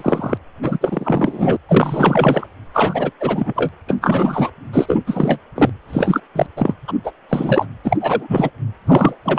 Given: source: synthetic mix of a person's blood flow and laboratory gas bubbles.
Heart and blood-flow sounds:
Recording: Doppler ultrasound of blood flow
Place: precordium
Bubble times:
0.00-0.38 s: bubbles
0.62-0.79 s: bubbles
0.81-1.56 s: bubbles
1.69-2.46 s: bubbles
2.73-3.12 s: bubbles
3.20-3.52 s: bubbles
3.55-3.69 s: bubbles
3.87-3.97 s: bubbles
4.01-4.50 s: bubbles
4.73-4.99 s: bubbles
5.07-5.39 s: bubbles
5.55-5.70 s: bubbles
5.88-6.21 s: bubbles
6.35-6.47 s: bubbles
6.57-6.75 s: bubbles
6.88-6.93 s: bubbles
7.04-7.12 s: bubbles
7.29-7.66 s: bubbles
7.84-7.97 s: bubbles
8.01-8.50 s: bubbles
8.87-9.16 s: bubbles
9.24-9.38 s: bubbles
From the record:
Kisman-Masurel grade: 343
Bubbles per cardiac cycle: rolling drumbeat, 9 or more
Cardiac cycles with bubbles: 100%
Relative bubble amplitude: loud (0.450 to 0.775)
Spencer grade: 3 (all of the cardiac periods contain showers or single bubble signals, but not dominating or overriding the cardiac motion signals)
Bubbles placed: anywhere in the cardiac cycle

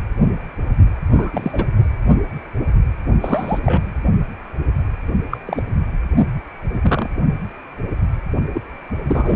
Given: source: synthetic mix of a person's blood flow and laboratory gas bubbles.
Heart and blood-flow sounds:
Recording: Doppler ultrasound of blood flow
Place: precordium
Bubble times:
1.13-1.68 s: bubbles
3.21-3.60 s: bubbles
3.63-4.03 s: bubbles
5.30-5.38 s: bubbles
5.45-5.62 s: bubbles
6.73-6.79 s: bubbles
6.82-7.10 s: bubbles
8.54-8.62 s: bubbles
9.07-9.36 s: bubbles
From the record:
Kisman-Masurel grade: 232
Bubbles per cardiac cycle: several, 3 to 8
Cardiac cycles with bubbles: 50 to 99%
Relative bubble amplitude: moderate (0.250 to 0.450)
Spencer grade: 3 (all of the cardiac periods contain showers or single bubble signals, but not dominating or overriding the cardiac motion signals)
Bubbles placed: only in the low amplitude regions of the cardiac cycle

